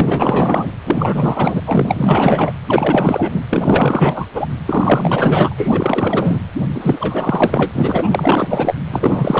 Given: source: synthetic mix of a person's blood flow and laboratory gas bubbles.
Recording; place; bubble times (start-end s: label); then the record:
Doppler ultrasound of blood flow; precordium
0.00-0.71 s: bubbles
0.85-1.61 s: bubbles
1.66-2.53 s: bubbles
2.67-3.44 s: bubbles
3.49-4.27 s: bubbles
4.35-4.46 s: bubbles
4.66-5.54 s: bubbles
5.57-6.42 s: bubbles
6.75-8.10 s: bubbles
8.12-8.74 s: bubbles
8.90-9.40 s: bubbles
From the record:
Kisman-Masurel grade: 444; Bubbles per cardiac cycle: continuous sound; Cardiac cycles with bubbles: 100%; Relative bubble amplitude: maximal (0.775 to 0.999); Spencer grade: 4 (maximum detectable bubble signal sounding continuously throughout systole and diastole of every cardiac period, and overriding the amplitude of the normal cardiac signals); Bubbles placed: anywhere in the cardiac cycle